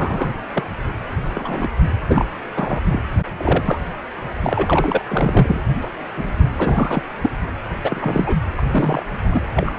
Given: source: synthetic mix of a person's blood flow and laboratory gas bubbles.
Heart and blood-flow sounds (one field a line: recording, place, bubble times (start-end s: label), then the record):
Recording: Doppler ultrasound of blood flow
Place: precordium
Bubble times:
0.00-0.33 s: bubbles
0.54-0.64 s: bubbles
1.31-1.68 s: bubbles
2.07-2.40 s: bubbles
2.57-2.81 s: bubbles
2.92-3.02 s: bubbles
3.37-3.78 s: bubbles
4.44-5.04 s: bubbles
5.09-5.61 s: bubbles
5.82-5.89 s: bubbles
6.16-6.34 s: bubbles
6.56-7.02 s: bubbles
7.22-7.30 s: bubbles
7.83-8.35 s: bubbles
8.57-8.61 s: bubbles
8.71-9.03 s: bubbles
9.19-9.41 s: bubbles
9.55-9.72 s: bubbles
From the record:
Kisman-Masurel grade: 243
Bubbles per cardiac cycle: several, 3 to 8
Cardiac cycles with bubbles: 100%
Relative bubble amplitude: loud (0.450 to 0.775)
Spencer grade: 3 (all of the cardiac periods contain showers or single bubble signals, but not dominating or overriding the cardiac motion signals)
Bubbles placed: anywhere in the cardiac cycle